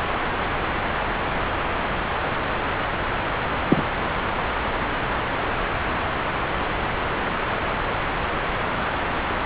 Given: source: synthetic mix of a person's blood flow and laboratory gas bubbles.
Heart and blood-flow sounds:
Doppler ultrasound of blood flow; subclavian vein
3.68-3.83 s: bubbles
From the record:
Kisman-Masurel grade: 113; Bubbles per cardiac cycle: 1 to 2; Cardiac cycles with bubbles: 1 to 10%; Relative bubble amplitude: loud (0.450 to 0.775); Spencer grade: 1 (occasional bubble signal discernible with the cardiac motion signal, with majority of cardiac periods free of bubbles); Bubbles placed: anywhere in the cardiac cycle

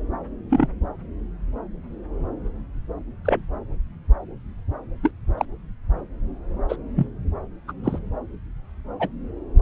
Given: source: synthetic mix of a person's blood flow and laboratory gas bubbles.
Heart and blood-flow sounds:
Doppler ultrasound of blood flow; subclavian vein
0.50-0.67 s: bubbles
3.25-3.46 s: bubbles
5.02-5.10 s: bubbles
5.38-5.45 s: bubbles
6.68-6.76 s: bubbles
6.96-7.07 s: bubbles
7.67-7.72 s: bubbles
7.83-7.99 s: bubbles
8.99-9.08 s: bubbles
From the record:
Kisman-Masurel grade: 122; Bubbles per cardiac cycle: 1 to 2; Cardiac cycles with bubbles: 10 to 50%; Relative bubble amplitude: moderate (0.250 to 0.450); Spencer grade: 2 (many but less than half of the cardiac periods contain bubble signals, singularly or in groups); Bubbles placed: anywhere in the cardiac cycle

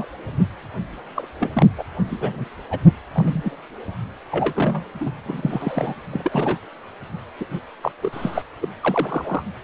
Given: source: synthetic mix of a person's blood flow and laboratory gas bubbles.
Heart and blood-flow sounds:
Doppler ultrasound of blood flow; precordium
0.00-0.08 s: bubbles
1.15-1.28 s: bubbles
1.40-1.66 s: bubbles
1.77-1.83 s: bubbles
2.07-2.17 s: bubbles
2.21-2.45 s: bubbles
2.71-2.79 s: bubbles
3.12-3.56 s: bubbles
4.32-4.84 s: bubbles
5.00-5.11 s: bubbles
5.26-5.94 s: bubbles
6.12-6.58 s: bubbles
7.39-7.46 s: bubbles
7.52-7.59 s: bubbles
7.82-7.92 s: bubbles
8.02-8.42 s: bubbles
8.61-8.68 s: bubbles
8.81-9.43 s: bubbles
From the record:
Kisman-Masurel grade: 242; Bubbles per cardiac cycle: several, 3 to 8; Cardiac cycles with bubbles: 100%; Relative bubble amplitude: moderate (0.250 to 0.450); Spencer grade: 3 (all of the cardiac periods contain showers or single bubble signals, but not dominating or overriding the cardiac motion signals); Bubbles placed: anywhere in the cardiac cycle

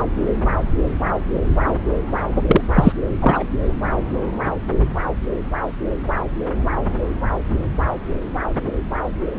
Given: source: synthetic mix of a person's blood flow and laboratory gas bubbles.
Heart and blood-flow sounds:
Doppler ultrasound of blood flow; subclavian vein
2.46-2.61 s: bubbles
2.73-2.92 s: bubbles
3.21-3.44 s: bubbles
From the record:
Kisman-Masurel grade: 213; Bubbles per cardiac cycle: several, 3 to 8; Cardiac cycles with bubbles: 1 to 10%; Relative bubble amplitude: loud (0.450 to 0.775); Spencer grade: 1 (occasional bubble signal discernible with the cardiac motion signal, with majority of cardiac periods free of bubbles); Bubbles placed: anywhere in the cardiac cycle

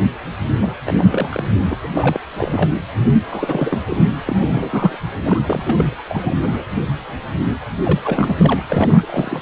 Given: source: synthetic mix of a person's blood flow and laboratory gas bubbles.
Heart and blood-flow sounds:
Doppler ultrasound of blood flow; precordium
0.59-0.72 s: bubbles
0.85-0.92 s: bubbles
0.98-1.44 s: bubbles
1.65-1.76 s: bubbles
1.83-1.88 s: bubbles
1.94-2.20 s: bubbles
2.35-2.72 s: bubbles
2.98-3.09 s: bubbles
3.29-3.81 s: bubbles
3.85-4.11 s: bubbles
4.26-4.37 s: bubbles
4.42-4.98 s: bubbles
5.24-5.40 s: bubbles
5.48-5.74 s: bubbles
5.77-5.96 s: bubbles
6.09-6.36 s: bubbles
6.42-6.63 s: bubbles
7.84-7.98 s: bubbles
8.04-8.36 s: bubbles
8.38-8.62 s: bubbles
8.68-9.42 s: bubbles
From the record:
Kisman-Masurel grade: 332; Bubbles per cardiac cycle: rolling drumbeat, 9 or more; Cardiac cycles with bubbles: 50 to 99%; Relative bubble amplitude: moderate (0.250 to 0.450); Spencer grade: 3 (all of the cardiac periods contain showers or single bubble signals, but not dominating or overriding the cardiac motion signals); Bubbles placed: anywhere in the cardiac cycle

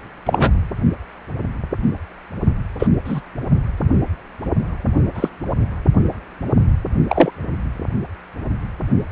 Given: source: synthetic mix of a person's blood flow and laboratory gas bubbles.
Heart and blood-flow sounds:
Doppler ultrasound of blood flow; precordium
0.26-0.50 s: bubbles
2.79-2.87 s: bubbles
3.04-3.21 s: bubbles
5.14-5.29 s: bubbles
7.08-7.31 s: bubbles
From the record:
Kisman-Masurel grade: 123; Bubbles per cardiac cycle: 1 to 2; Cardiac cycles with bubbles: 10 to 50%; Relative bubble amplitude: loud (0.450 to 0.775); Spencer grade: 2 (many but less than half of the cardiac periods contain bubble signals, singularly or in groups); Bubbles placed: only in the low amplitude regions of the cardiac cycle

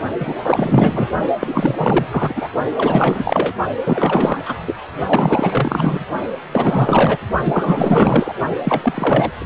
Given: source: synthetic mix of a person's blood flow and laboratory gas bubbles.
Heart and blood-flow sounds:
Doppler ultrasound of blood flow; precordium
0.20-0.36 s: bubbles
0.43-1.09 s: bubbles
1.40-2.06 s: bubbles
2.11-2.49 s: bubbles
2.77-3.53 s: bubbles
3.85-4.54 s: bubbles
4.67-4.75 s: bubbles
5.07-6.06 s: bubbles
6.52-7.17 s: bubbles
7.45-8.35 s: bubbles
8.63-9.31 s: bubbles
9.39-9.46 s: bubbles
From the record:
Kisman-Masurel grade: 444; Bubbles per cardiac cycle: continuous sound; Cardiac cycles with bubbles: 100%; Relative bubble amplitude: maximal (0.775 to 0.999); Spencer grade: 4 (maximum detectable bubble signal sounding continuously throughout systole and diastole of every cardiac period, and overriding the amplitude of the normal cardiac signals); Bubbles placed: only in the low amplitude regions of the cardiac cycle

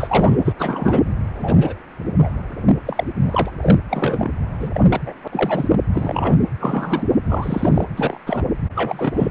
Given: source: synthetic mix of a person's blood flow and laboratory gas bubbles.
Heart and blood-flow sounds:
Doppler ultrasound of blood flow; precordium
0.00-0.37 s: bubbles
0.45-0.53 s: bubbles
0.58-1.04 s: bubbles
1.34-1.74 s: bubbles
2.18-2.30 s: bubbles
2.85-3.04 s: bubbles
3.20-3.22 s: bubbles
3.26-3.50 s: bubbles
3.61-3.78 s: bubbles
3.88-4.30 s: bubbles
4.60-4.70 s: bubbles
4.74-4.87 s: bubbles
4.89-5.01 s: bubbles
5.06-5.13 s: bubbles
5.24-5.28 s: bubbles
5.32-5.67 s: bubbles
5.71-5.80 s: bubbles
5.92-6.37 s: bubbles
6.61-7.06 s: bubbles
7.25-7.85 s: bubbles
7.96-8.17 s: bubbles
8.26-8.45 s: bubbles
8.75-9.31 s: bubbles
From the record:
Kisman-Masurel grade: 243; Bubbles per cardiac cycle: several, 3 to 8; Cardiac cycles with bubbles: 100%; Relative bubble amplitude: loud (0.450 to 0.775); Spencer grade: 3 (all of the cardiac periods contain showers or single bubble signals, but not dominating or overriding the cardiac motion signals); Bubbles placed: anywhere in the cardiac cycle

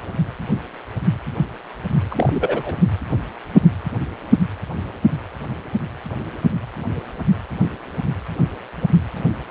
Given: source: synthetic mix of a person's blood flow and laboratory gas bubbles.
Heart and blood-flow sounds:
Doppler ultrasound of blood flow; precordium
2.10-2.73 s: bubbles
From the record:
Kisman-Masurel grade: 212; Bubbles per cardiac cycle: several, 3 to 8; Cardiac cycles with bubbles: 1 to 10%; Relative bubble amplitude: moderate (0.250 to 0.450); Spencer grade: 1 (occasional bubble signal discernible with the cardiac motion signal, with majority of cardiac periods free of bubbles); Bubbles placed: anywhere in the cardiac cycle

